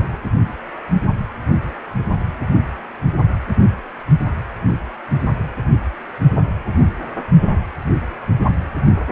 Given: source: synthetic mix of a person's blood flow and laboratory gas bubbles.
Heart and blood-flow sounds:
Doppler ultrasound of blood flow; precordium
no bubbles
From the record:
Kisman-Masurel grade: 000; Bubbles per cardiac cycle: 0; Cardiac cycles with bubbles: 0%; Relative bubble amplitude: no bubbles discernible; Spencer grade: 0 (complete lack of bubble signals)

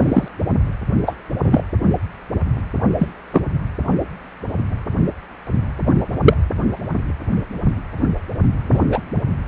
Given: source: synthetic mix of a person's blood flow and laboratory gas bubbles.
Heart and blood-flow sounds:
Doppler ultrasound of blood flow; precordium
0.02-0.28 s: bubbles
1.06-1.15 s: bubbles
1.42-1.62 s: bubbles
2.99-3.08 s: bubbles
3.32-3.42 s: bubbles
6.24-6.33 s: bubbles
8.71-8.80 s: bubbles
8.92-9.02 s: bubbles
From the record:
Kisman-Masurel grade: 123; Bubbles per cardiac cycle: 1 to 2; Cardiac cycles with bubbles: 10 to 50%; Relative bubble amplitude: loud (0.450 to 0.775); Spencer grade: 2 (many but less than half of the cardiac periods contain bubble signals, singularly or in groups); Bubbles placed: anywhere in the cardiac cycle

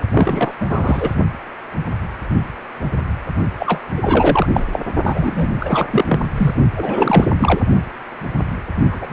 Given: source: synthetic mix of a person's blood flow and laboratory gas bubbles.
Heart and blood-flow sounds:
Doppler ultrasound of blood flow; precordium
0.13-0.53 s: bubbles
0.60-1.15 s: bubbles
3.58-3.81 s: bubbles
3.97-4.64 s: bubbles
4.72-4.79 s: bubbles
5.03-5.49 s: bubbles
5.60-6.20 s: bubbles
6.37-6.53 s: bubbles
6.75-7.25 s: bubbles
7.38-7.61 s: bubbles
8.91-9.06 s: bubbles
9.10-9.13 s: bubbles
From the record:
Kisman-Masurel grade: 333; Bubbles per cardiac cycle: rolling drumbeat, 9 or more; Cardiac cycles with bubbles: 50 to 99%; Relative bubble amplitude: loud (0.450 to 0.775); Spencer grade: 3 (all of the cardiac periods contain showers or single bubble signals, but not dominating or overriding the cardiac motion signals); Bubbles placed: only in the low amplitude regions of the cardiac cycle

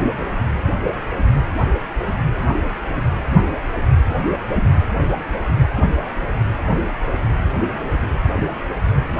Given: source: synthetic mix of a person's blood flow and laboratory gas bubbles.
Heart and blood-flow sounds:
Doppler ultrasound of blood flow; precordium
0.00-0.03 s: bubbles
0.18-0.35 s: bubbles
From the record:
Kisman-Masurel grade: 211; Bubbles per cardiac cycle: several, 3 to 8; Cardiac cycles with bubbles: 1 to 10%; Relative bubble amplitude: barely perceptible (0.100 to 0.250); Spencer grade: 1 (occasional bubble signal discernible with the cardiac motion signal, with majority of cardiac periods free of bubbles); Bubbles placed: anywhere in the cardiac cycle

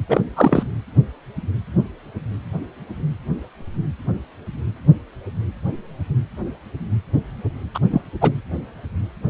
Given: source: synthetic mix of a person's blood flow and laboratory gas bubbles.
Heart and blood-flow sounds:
Doppler ultrasound of blood flow; precordium
0.08-0.21 s: bubbles
0.35-0.63 s: bubbles
7.74-7.79 s: bubbles
7.90-8.01 s: bubbles
8.21-8.31 s: bubbles
From the record:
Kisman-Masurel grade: 223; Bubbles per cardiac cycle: several, 3 to 8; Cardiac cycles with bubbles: 10 to 50%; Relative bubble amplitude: loud (0.450 to 0.775); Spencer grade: 2 (many but less than half of the cardiac periods contain bubble signals, singularly or in groups); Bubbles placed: anywhere in the cardiac cycle

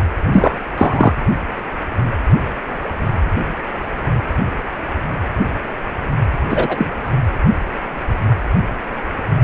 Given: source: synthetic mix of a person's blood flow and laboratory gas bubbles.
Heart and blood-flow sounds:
Doppler ultrasound of blood flow; precordium
0.26-0.59 s: bubbles
0.78-1.13 s: bubbles
6.50-6.93 s: bubbles
From the record:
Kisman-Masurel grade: 223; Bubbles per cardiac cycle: several, 3 to 8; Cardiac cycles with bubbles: 10 to 50%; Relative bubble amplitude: loud (0.450 to 0.775); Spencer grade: 2 (many but less than half of the cardiac periods contain bubble signals, singularly or in groups); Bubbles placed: anywhere in the cardiac cycle

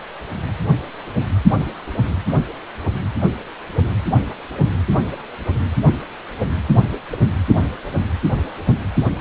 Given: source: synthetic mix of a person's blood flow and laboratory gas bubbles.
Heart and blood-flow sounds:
Doppler ultrasound of blood flow; precordium
7.11-7.18 s: bubbles
From the record:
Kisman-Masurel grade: 111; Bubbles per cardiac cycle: 1 to 2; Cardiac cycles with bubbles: 1 to 10%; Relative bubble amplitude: barely perceptible (0.100 to 0.250); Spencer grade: 1 (occasional bubble signal discernible with the cardiac motion signal, with majority of cardiac periods free of bubbles); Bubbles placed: anywhere in the cardiac cycle

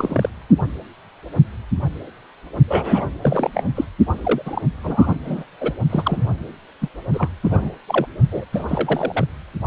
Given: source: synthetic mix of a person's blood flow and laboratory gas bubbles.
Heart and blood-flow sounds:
Doppler ultrasound of blood flow; precordium
0.00-0.29 s: bubbles
2.67-3.05 s: bubbles
3.22-3.50 s: bubbles
3.54-3.65 s: bubbles
3.75-3.84 s: bubbles
4.23-4.42 s: bubbles
4.46-4.62 s: bubbles
4.83-5.15 s: bubbles
5.26-5.45 s: bubbles
5.60-5.71 s: bubbles
5.89-6.29 s: bubbles
6.81-6.88 s: bubbles
7.13-7.29 s: bubbles
7.43-7.71 s: bubbles
7.87-8.07 s: bubbles
8.31-8.45 s: bubbles
8.53-8.65 s: bubbles
8.68-9.26 s: bubbles
From the record:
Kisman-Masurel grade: 232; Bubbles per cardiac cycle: several, 3 to 8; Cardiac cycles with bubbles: 50 to 99%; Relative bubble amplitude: moderate (0.250 to 0.450); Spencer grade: 3 (all of the cardiac periods contain showers or single bubble signals, but not dominating or overriding the cardiac motion signals); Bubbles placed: only in the low amplitude regions of the cardiac cycle

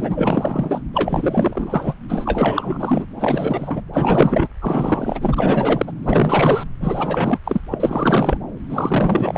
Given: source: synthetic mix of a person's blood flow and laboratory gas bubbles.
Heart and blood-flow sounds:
Doppler ultrasound of blood flow; subclavian vein
0.00-0.81 s: bubbles
0.94-1.95 s: bubbles
2.08-3.06 s: bubbles
3.17-3.82 s: bubbles
3.93-4.47 s: bubbles
4.61-5.92 s: bubbles
6.03-6.63 s: bubbles
6.80-7.40 s: bubbles
7.45-7.61 s: bubbles
7.71-8.38 s: bubbles
8.69-9.38 s: bubbles
From the record:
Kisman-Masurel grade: 444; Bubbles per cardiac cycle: continuous sound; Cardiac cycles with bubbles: 100%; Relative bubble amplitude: maximal (0.775 to 0.999); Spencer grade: 4 (maximum detectable bubble signal sounding continuously throughout systole and diastole of every cardiac period, and overriding the amplitude of the normal cardiac signals); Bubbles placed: anywhere in the cardiac cycle

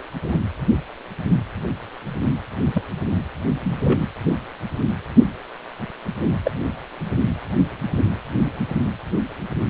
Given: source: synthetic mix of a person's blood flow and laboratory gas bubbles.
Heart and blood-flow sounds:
Doppler ultrasound of blood flow; precordium
0.23-0.38 s: bubbles
2.74-2.83 s: bubbles
3.60-4.08 s: bubbles
6.44-6.51 s: bubbles
From the record:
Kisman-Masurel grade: 122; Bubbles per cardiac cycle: 1 to 2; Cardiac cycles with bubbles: 10 to 50%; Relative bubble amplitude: moderate (0.250 to 0.450); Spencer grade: 2 (many but less than half of the cardiac periods contain bubble signals, singularly or in groups); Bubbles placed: anywhere in the cardiac cycle

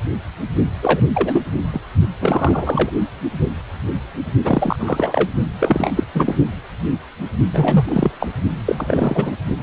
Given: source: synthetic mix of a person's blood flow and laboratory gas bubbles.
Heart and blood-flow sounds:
Doppler ultrasound of blood flow; precordium
0.82-1.05 s: bubbles
1.14-1.42 s: bubbles
1.73-1.81 s: bubbles
2.20-2.91 s: bubbles
4.43-4.76 s: bubbles
4.79-5.30 s: bubbles
5.60-5.91 s: bubbles
5.95-6.04 s: bubbles
6.14-6.35 s: bubbles
7.53-7.85 s: bubbles
7.88-8.11 s: bubbles
8.19-8.28 s: bubbles
8.66-9.35 s: bubbles
From the record:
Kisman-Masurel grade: 332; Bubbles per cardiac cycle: rolling drumbeat, 9 or more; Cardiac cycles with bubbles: 50 to 99%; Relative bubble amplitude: moderate (0.250 to 0.450); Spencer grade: 3 (all of the cardiac periods contain showers or single bubble signals, but not dominating or overriding the cardiac motion signals); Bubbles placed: only in the low amplitude regions of the cardiac cycle

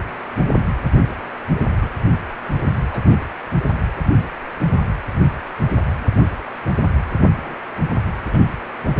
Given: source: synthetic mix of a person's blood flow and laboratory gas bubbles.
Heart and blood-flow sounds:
Doppler ultrasound of blood flow; precordium
1.55-1.66 s: bubbles
1.78-1.89 s: bubbles
2.92-3.00 s: bubbles
3.10-3.17 s: bubbles
7.34-7.56 s: bubbles
7.91-8.00 s: bubbles
8.25-8.39 s: bubbles
From the record:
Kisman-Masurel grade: 121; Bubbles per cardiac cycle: 1 to 2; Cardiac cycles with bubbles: 10 to 50%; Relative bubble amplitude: barely perceptible (0.100 to 0.250); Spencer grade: 2 (many but less than half of the cardiac periods contain bubble signals, singularly or in groups); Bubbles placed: anywhere in the cardiac cycle

